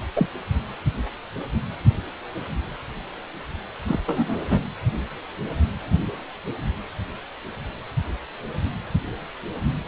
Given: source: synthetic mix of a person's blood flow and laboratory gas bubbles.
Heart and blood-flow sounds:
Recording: Doppler ultrasound of blood flow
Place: precordium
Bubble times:
0.15-0.26 s: bubbles
3.87-3.99 s: bubbles
4.06-4.67 s: bubbles
From the record:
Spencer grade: 2 (many but less than half of the cardiac periods contain bubble signals, singularly or in groups)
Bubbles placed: anywhere in the cardiac cycle

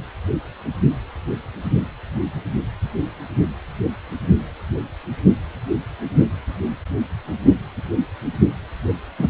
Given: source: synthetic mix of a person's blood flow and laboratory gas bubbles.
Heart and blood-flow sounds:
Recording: Doppler ultrasound of blood flow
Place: precordium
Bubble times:
9.18-9.28 s: bubbles
From the record:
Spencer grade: 2 (many but less than half of the cardiac periods contain bubble signals, singularly or in groups)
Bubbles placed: anywhere in the cardiac cycle

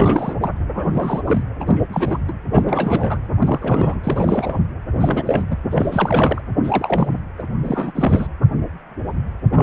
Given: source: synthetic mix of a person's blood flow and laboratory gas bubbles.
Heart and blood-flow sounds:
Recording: Doppler ultrasound of blood flow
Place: precordium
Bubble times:
0.00-0.34 s: bubbles
0.41-0.51 s: bubbles
0.73-1.22 s: bubbles
1.27-1.44 s: bubbles
1.60-1.84 s: bubbles
1.93-2.18 s: bubbles
2.27-2.32 s: bubbles
2.52-2.62 s: bubbles
2.65-3.18 s: bubbles
3.38-3.98 s: bubbles
4.04-4.60 s: bubbles
4.96-5.45 s: bubbles
5.50-5.57 s: bubbles
5.71-6.41 s: bubbles
6.64-7.25 s: bubbles
7.39-7.43 s: bubbles
7.64-7.92 s: bubbles
7.94-8.27 s: bubbles
9.52-9.63 s: bubbles
From the record:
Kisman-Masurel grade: 332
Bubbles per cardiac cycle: rolling drumbeat, 9 or more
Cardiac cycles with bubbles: 50 to 99%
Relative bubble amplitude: moderate (0.250 to 0.450)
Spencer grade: 3 (all of the cardiac periods contain showers or single bubble signals, but not dominating or overriding the cardiac motion signals)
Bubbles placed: anywhere in the cardiac cycle

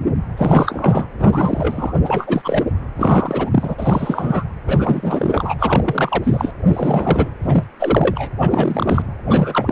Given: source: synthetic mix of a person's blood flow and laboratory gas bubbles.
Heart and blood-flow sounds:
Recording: Doppler ultrasound of blood flow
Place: precordium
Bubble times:
0.36-1.07 s: bubbles
1.20-1.94 s: bubbles
2.04-2.42 s: bubbles
2.44-2.65 s: bubbles
2.96-3.75 s: bubbles
3.79-4.45 s: bubbles
4.67-5.55 s: bubbles
5.58-6.51 s: bubbles
6.73-7.31 s: bubbles
7.42-7.64 s: bubbles
7.79-8.29 s: bubbles
8.40-9.02 s: bubbles
9.27-9.72 s: bubbles
From the record:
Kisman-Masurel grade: 343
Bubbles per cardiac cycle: rolling drumbeat, 9 or more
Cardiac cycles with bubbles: 100%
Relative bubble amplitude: loud (0.450 to 0.775)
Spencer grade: 3 (all of the cardiac periods contain showers or single bubble signals, but not dominating or overriding the cardiac motion signals)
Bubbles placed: anywhere in the cardiac cycle

